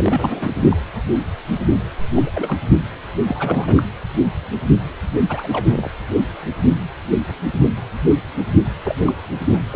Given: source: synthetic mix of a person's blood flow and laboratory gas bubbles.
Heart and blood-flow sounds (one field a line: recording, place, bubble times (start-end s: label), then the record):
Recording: Doppler ultrasound of blood flow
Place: precordium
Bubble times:
0.00-0.51 s: bubbles
0.70-0.76 s: bubbles
2.16-2.22 s: bubbles
2.26-2.31 s: bubbles
2.34-2.58 s: bubbles
3.12-3.83 s: bubbles
5.29-5.47 s: bubbles
5.51-5.91 s: bubbles
8.83-8.95 s: bubbles
9.06-9.12 s: bubbles
9.53-9.58 s: bubbles
9.71-9.76 s: bubbles
From the record:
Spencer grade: 3 (all of the cardiac periods contain showers or single bubble signals, but not dominating or overriding the cardiac motion signals)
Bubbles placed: anywhere in the cardiac cycle